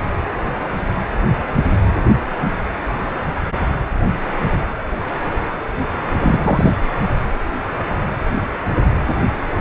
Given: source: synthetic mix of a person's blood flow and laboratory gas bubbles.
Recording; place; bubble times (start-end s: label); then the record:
Doppler ultrasound of blood flow; precordium
6.20-6.72 s: bubbles
From the record:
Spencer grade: 1 (occasional bubble signal discernible with the cardiac motion signal, with majority of cardiac periods free of bubbles); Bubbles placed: anywhere in the cardiac cycle